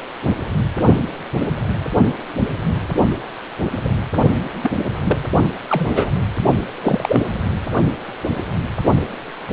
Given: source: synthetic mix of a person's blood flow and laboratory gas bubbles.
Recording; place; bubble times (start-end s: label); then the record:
Doppler ultrasound of blood flow; precordium
3.84-3.90 s: bubbles
4.62-4.71 s: bubbles
5.04-5.18 s: bubbles
5.70-6.12 s: bubbles
6.83-7.21 s: bubbles
From the record:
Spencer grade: 2 (many but less than half of the cardiac periods contain bubble signals, singularly or in groups); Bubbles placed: only in the low amplitude regions of the cardiac cycle